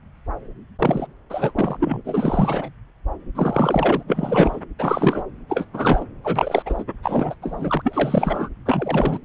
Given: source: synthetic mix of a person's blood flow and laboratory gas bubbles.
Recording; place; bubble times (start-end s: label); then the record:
Doppler ultrasound of blood flow; subclavian vein
0.78-1.06 s: bubbles
1.29-1.52 s: bubbles
1.55-1.77 s: bubbles
1.80-2.69 s: bubbles
3.35-4.03 s: bubbles
4.08-4.60 s: bubbles
4.79-5.22 s: bubbles
5.48-5.65 s: bubbles
5.73-6.05 s: bubbles
6.23-6.62 s: bubbles
6.65-6.83 s: bubbles
7.02-7.34 s: bubbles
7.42-8.49 s: bubbles
8.65-9.18 s: bubbles
From the record:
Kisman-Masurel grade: 333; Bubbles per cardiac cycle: rolling drumbeat, 9 or more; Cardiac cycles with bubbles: 50 to 99%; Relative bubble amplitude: loud (0.450 to 0.775); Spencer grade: 3 (all of the cardiac periods contain showers or single bubble signals, but not dominating or overriding the cardiac motion signals); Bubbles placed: anywhere in the cardiac cycle